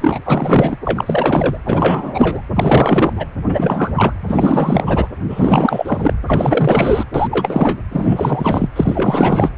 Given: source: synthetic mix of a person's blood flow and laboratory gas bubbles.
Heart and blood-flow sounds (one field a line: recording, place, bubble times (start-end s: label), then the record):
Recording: Doppler ultrasound of blood flow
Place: precordium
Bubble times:
0.00-0.19 s: bubbles
0.25-0.78 s: bubbles
0.85-1.57 s: bubbles
1.66-2.42 s: bubbles
2.54-3.13 s: bubbles
3.16-3.25 s: bubbles
3.48-4.13 s: bubbles
4.27-5.08 s: bubbles
5.29-6.13 s: bubbles
6.26-7.04 s: bubbles
7.14-7.82 s: bubbles
7.91-8.69 s: bubbles
8.76-9.50 s: bubbles
From the record:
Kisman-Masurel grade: 444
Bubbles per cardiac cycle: continuous sound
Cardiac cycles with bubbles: 100%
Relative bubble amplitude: maximal (0.775 to 0.999)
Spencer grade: 4 (maximum detectable bubble signal sounding continuously throughout systole and diastole of every cardiac period, and overriding the amplitude of the normal cardiac signals)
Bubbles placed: anywhere in the cardiac cycle